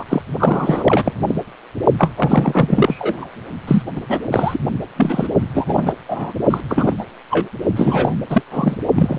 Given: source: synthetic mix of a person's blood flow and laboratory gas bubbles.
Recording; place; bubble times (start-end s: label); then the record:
Doppler ultrasound of blood flow; precordium
0.00-0.03 s: bubbles
0.09-0.22 s: bubbles
0.39-1.15 s: bubbles
1.27-1.35 s: bubbles
1.98-2.10 s: bubbles
2.17-3.28 s: bubbles
3.67-3.82 s: bubbles
3.95-4.03 s: bubbles
4.08-4.20 s: bubbles
4.31-4.59 s: bubbles
4.96-5.27 s: bubbles
5.54-5.93 s: bubbles
6.08-6.33 s: bubbles
6.50-6.61 s: bubbles
6.69-6.94 s: bubbles
6.97-7.04 s: bubbles
7.31-7.49 s: bubbles
7.75-8.14 s: bubbles
8.29-8.42 s: bubbles
8.51-8.77 s: bubbles
8.96-9.19 s: bubbles
From the record:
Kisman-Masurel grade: 343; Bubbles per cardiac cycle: rolling drumbeat, 9 or more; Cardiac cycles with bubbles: 100%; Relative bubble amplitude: loud (0.450 to 0.775); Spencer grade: 3 (all of the cardiac periods contain showers or single bubble signals, but not dominating or overriding the cardiac motion signals); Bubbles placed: only in the low amplitude regions of the cardiac cycle